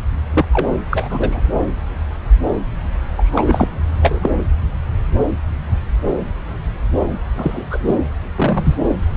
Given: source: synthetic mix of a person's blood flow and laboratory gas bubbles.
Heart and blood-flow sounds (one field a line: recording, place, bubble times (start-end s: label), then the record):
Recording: Doppler ultrasound of blood flow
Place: subclavian vein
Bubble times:
0.34-0.46 s: bubbles
0.53-0.67 s: bubbles
0.91-1.42 s: bubbles
3.17-3.69 s: bubbles
4.01-4.30 s: bubbles
7.36-7.65 s: bubbles
7.71-7.79 s: bubbles
7.87-7.98 s: bubbles
8.36-8.75 s: bubbles
8.83-8.88 s: bubbles
From the record:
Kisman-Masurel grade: 233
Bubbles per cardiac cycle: several, 3 to 8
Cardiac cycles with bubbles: 50 to 99%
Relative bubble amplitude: loud (0.450 to 0.775)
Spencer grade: 3 (all of the cardiac periods contain showers or single bubble signals, but not dominating or overriding the cardiac motion signals)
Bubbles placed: anywhere in the cardiac cycle